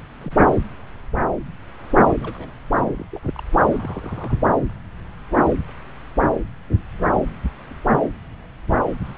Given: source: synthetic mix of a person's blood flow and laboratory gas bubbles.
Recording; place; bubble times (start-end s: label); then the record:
Doppler ultrasound of blood flow; subclavian vein
0.23-0.60 s: bubbles
2.04-2.52 s: bubbles
2.76-3.05 s: bubbles
3.12-3.19 s: bubbles
3.23-3.31 s: bubbles
3.36-3.42 s: bubbles
3.70-4.40 s: bubbles
9.04-9.18 s: bubbles
From the record:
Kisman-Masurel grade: 221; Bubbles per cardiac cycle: several, 3 to 8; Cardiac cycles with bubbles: 10 to 50%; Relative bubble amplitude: barely perceptible (0.100 to 0.250); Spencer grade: 2 (many but less than half of the cardiac periods contain bubble signals, singularly or in groups); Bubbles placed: anywhere in the cardiac cycle